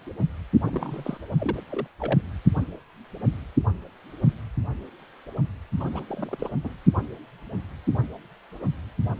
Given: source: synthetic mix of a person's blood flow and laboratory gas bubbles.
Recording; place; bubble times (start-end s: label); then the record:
Doppler ultrasound of blood flow; precordium
0.62-1.18 s: bubbles
1.39-1.57 s: bubbles
1.70-1.88 s: bubbles
1.99-2.20 s: bubbles
5.80-5.83 s: bubbles
5.92-6.04 s: bubbles
6.08-6.50 s: bubbles
6.63-6.73 s: bubbles
From the record:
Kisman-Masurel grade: 221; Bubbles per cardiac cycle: several, 3 to 8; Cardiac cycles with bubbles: 10 to 50%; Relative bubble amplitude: barely perceptible (0.100 to 0.250); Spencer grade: 2 (many but less than half of the cardiac periods contain bubble signals, singularly or in groups); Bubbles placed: only in the low amplitude regions of the cardiac cycle